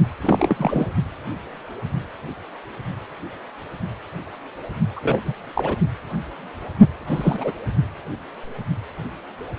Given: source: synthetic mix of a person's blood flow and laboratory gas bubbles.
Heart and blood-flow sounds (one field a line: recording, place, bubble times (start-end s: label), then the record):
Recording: Doppler ultrasound of blood flow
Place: precordium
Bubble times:
0.21-0.86 s: bubbles
4.96-5.00 s: bubbles
5.04-5.21 s: bubbles
5.25-5.33 s: bubbles
5.54-5.76 s: bubbles
7.07-7.51 s: bubbles
From the record:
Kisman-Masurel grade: 222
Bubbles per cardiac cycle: several, 3 to 8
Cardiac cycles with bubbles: 10 to 50%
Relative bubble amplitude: moderate (0.250 to 0.450)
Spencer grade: 2 (many but less than half of the cardiac periods contain bubble signals, singularly or in groups)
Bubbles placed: only in the low amplitude regions of the cardiac cycle